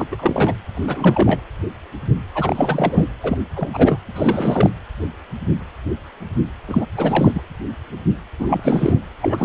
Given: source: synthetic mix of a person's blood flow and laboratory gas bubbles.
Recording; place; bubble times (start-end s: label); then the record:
Doppler ultrasound of blood flow; precordium
0.00-0.06 s: bubbles
0.11-0.54 s: bubbles
0.75-1.42 s: bubbles
2.34-3.07 s: bubbles
3.23-3.38 s: bubbles
3.54-3.69 s: bubbles
3.73-3.99 s: bubbles
4.15-4.70 s: bubbles
6.68-6.86 s: bubbles
6.97-7.32 s: bubbles
7.34-7.44 s: bubbles
8.39-8.99 s: bubbles
9.21-9.45 s: bubbles
From the record:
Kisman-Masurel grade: 333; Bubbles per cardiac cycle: rolling drumbeat, 9 or more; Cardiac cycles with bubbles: 50 to 99%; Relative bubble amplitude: loud (0.450 to 0.775); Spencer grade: 3 (all of the cardiac periods contain showers or single bubble signals, but not dominating or overriding the cardiac motion signals); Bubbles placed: anywhere in the cardiac cycle